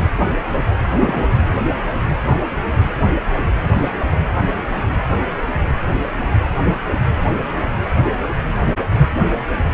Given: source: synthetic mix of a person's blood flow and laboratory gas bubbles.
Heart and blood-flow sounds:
Doppler ultrasound of blood flow; precordium
0.90-1.28 s: bubbles
From the record:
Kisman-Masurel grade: 211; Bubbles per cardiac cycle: several, 3 to 8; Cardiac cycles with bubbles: 1 to 10%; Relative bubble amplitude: barely perceptible (0.100 to 0.250); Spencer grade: 1 (occasional bubble signal discernible with the cardiac motion signal, with majority of cardiac periods free of bubbles); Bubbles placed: anywhere in the cardiac cycle

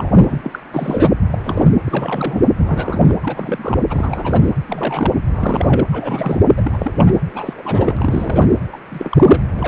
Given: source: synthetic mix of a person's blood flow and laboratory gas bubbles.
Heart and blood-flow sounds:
Doppler ultrasound of blood flow; precordium
0.00-0.59 s: bubbles
0.74-1.12 s: bubbles
1.30-1.38 s: bubbles
1.43-1.71 s: bubbles
1.84-2.42 s: bubbles
2.57-3.15 s: bubbles
3.23-3.83 s: bubbles
3.89-4.53 s: bubbles
4.68-5.12 s: bubbles
5.27-5.85 s: bubbles
5.92-6.38 s: bubbles
6.56-6.62 s: bubbles
6.64-6.76 s: bubbles
6.79-6.92 s: bubbles
6.96-7.14 s: bubbles
7.34-8.51 s: bubbles
8.73-8.77 s: bubbles
8.92-9.40 s: bubbles
9.51-9.68 s: bubbles
From the record:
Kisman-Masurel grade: 342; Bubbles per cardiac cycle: rolling drumbeat, 9 or more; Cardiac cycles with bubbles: 100%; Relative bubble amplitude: moderate (0.250 to 0.450); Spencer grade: 3 (all of the cardiac periods contain showers or single bubble signals, but not dominating or overriding the cardiac motion signals); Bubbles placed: anywhere in the cardiac cycle

